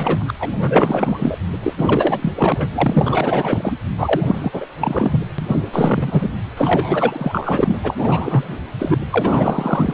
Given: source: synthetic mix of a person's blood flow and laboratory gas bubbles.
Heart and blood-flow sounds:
Doppler ultrasound of blood flow; precordium
0.00-0.30 s: bubbles
0.40-1.38 s: bubbles
1.62-1.74 s: bubbles
1.77-2.33 s: bubbles
2.37-2.70 s: bubbles
2.75-3.76 s: bubbles
3.98-4.21 s: bubbles
4.27-4.67 s: bubbles
4.80-5.19 s: bubbles
5.38-5.62 s: bubbles
5.72-6.29 s: bubbles
6.57-7.95 s: bubbles
7.97-8.60 s: bubbles
8.79-8.98 s: bubbles
9.11-9.94 s: bubbles
From the record:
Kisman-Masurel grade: 444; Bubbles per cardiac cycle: continuous sound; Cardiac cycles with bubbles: 100%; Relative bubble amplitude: maximal (0.775 to 0.999); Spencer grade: 4 (maximum detectable bubble signal sounding continuously throughout systole and diastole of every cardiac period, and overriding the amplitude of the normal cardiac signals); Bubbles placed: anywhere in the cardiac cycle

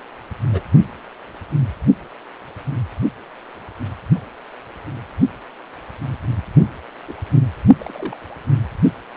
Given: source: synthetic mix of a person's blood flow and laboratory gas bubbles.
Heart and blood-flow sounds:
Doppler ultrasound of blood flow; precordium
0.43-0.61 s: bubbles
7.08-7.15 s: bubbles
7.80-8.18 s: bubbles
From the record:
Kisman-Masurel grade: 121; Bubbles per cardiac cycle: 1 to 2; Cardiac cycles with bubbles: 10 to 50%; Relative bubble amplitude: barely perceptible (0.100 to 0.250); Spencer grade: 2 (many but less than half of the cardiac periods contain bubble signals, singularly or in groups); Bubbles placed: only in the low amplitude regions of the cardiac cycle

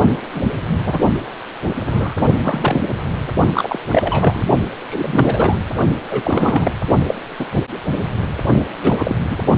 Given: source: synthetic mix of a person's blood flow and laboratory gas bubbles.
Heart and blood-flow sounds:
Doppler ultrasound of blood flow; precordium
0.35-0.41 s: bubbles
0.85-0.99 s: bubbles
1.86-2.15 s: bubbles
2.43-2.81 s: bubbles
3.54-3.78 s: bubbles
3.88-4.43 s: bubbles
4.89-5.59 s: bubbles
6.10-6.75 s: bubbles
7.06-7.14 s: bubbles
7.38-7.46 s: bubbles
7.54-7.61 s: bubbles
8.83-9.16 s: bubbles
9.29-9.38 s: bubbles
From the record:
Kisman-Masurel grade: 233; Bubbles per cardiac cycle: several, 3 to 8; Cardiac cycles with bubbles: 50 to 99%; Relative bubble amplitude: loud (0.450 to 0.775); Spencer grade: 3 (all of the cardiac periods contain showers or single bubble signals, but not dominating or overriding the cardiac motion signals); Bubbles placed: only in the low amplitude regions of the cardiac cycle

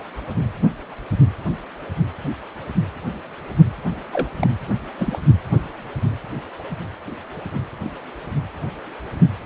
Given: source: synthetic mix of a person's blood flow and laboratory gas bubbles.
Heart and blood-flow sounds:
Doppler ultrasound of blood flow; precordium
3.83-3.95 s: bubbles
4.13-4.29 s: bubbles
4.40-4.47 s: bubbles
4.98-5.18 s: bubbles
From the record:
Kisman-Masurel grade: 222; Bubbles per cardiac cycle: several, 3 to 8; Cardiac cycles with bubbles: 10 to 50%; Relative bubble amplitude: moderate (0.250 to 0.450); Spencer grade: 2 (many but less than half of the cardiac periods contain bubble signals, singularly or in groups); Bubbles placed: anywhere in the cardiac cycle

